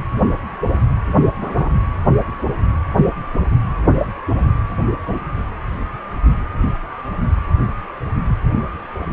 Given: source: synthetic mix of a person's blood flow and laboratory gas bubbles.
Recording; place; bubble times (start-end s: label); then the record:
Doppler ultrasound of blood flow; precordium
1.41-1.71 s: bubbles
From the record:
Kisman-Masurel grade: 112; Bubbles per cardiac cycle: 1 to 2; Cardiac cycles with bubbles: 1 to 10%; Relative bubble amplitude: moderate (0.250 to 0.450); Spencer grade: 1 (occasional bubble signal discernible with the cardiac motion signal, with majority of cardiac periods free of bubbles); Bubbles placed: anywhere in the cardiac cycle